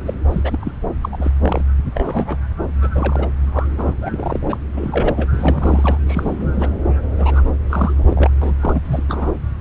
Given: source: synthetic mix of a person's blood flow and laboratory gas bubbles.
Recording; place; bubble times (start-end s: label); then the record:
Doppler ultrasound of blood flow; subclavian vein
0.05-0.13 s: bubbles
0.29-0.72 s: bubbles
1.01-1.09 s: bubbles
1.12-1.31 s: bubbles
1.43-1.63 s: bubbles
1.94-2.37 s: bubbles
2.83-2.88 s: bubbles
2.93-3.27 s: bubbles
3.53-3.66 s: bubbles
3.77-3.96 s: bubbles
4.00-4.58 s: bubbles
4.76-5.28 s: bubbles
5.34-5.98 s: bubbles
6.06-6.69 s: bubbles
7.18-7.43 s: bubbles
7.69-8.31 s: bubbles
8.42-8.54 s: bubbles
8.60-8.81 s: bubbles
8.85-9.03 s: bubbles
9.08-9.32 s: bubbles
From the record:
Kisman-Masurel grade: 342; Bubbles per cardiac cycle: rolling drumbeat, 9 or more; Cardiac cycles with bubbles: 100%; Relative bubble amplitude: moderate (0.250 to 0.450); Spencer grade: 3 (all of the cardiac periods contain showers or single bubble signals, but not dominating or overriding the cardiac motion signals); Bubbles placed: anywhere in the cardiac cycle